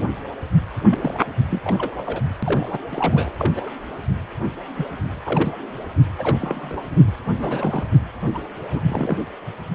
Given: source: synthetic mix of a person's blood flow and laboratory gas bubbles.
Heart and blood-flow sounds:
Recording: Doppler ultrasound of blood flow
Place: precordium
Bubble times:
0.90-1.14 s: bubbles
1.51-1.59 s: bubbles
1.64-1.91 s: bubbles
1.98-2.03 s: bubbles
2.06-2.21 s: bubbles
2.42-2.78 s: bubbles
2.91-3.33 s: bubbles
3.38-3.52 s: bubbles
3.55-3.71 s: bubbles
4.75-4.86 s: bubbles
5.23-5.63 s: bubbles
6.19-6.82 s: bubbles
7.37-7.87 s: bubbles
8.34-8.38 s: bubbles
8.74-8.81 s: bubbles
8.88-9.17 s: bubbles
From the record:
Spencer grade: 3 (all of the cardiac periods contain showers or single bubble signals, but not dominating or overriding the cardiac motion signals)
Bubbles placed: anywhere in the cardiac cycle

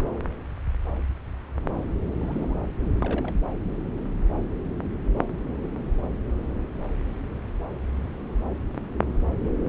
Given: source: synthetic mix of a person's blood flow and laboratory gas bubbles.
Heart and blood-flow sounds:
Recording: Doppler ultrasound of blood flow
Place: subclavian vein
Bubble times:
2.19-2.55 s: bubbles
3.01-3.34 s: bubbles
From the record:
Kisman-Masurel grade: 211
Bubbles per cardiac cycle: several, 3 to 8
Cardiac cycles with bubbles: 1 to 10%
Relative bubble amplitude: barely perceptible (0.100 to 0.250)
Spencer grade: 1 (occasional bubble signal discernible with the cardiac motion signal, with majority of cardiac periods free of bubbles)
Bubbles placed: anywhere in the cardiac cycle

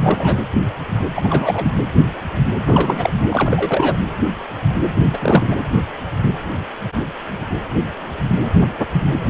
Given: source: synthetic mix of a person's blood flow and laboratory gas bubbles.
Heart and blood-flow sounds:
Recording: Doppler ultrasound of blood flow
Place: precordium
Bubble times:
0.00-0.37 s: bubbles
1.16-1.71 s: bubbles
2.65-3.10 s: bubbles
3.31-3.97 s: bubbles
5.12-5.18 s: bubbles
5.21-5.57 s: bubbles
From the record:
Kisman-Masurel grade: 222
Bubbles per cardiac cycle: several, 3 to 8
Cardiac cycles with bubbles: 10 to 50%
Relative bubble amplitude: moderate (0.250 to 0.450)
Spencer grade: 2 (many but less than half of the cardiac periods contain bubble signals, singularly or in groups)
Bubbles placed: anywhere in the cardiac cycle

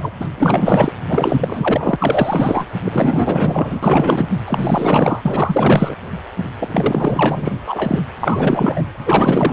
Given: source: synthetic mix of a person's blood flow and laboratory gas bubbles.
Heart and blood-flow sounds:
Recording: Doppler ultrasound of blood flow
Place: precordium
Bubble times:
0.00-0.12 s: bubbles
0.20-0.29 s: bubbles
0.38-0.92 s: bubbles
1.08-2.67 s: bubbles
2.85-4.25 s: bubbles
4.46-5.95 s: bubbles
6.59-7.53 s: bubbles
7.67-8.02 s: bubbles
8.21-8.84 s: bubbles
9.04-9.53 s: bubbles
From the record:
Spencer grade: 4 (maximum detectable bubble signal sounding continuously throughout systole and diastole of every cardiac period, and overriding the amplitude of the normal cardiac signals)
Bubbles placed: anywhere in the cardiac cycle

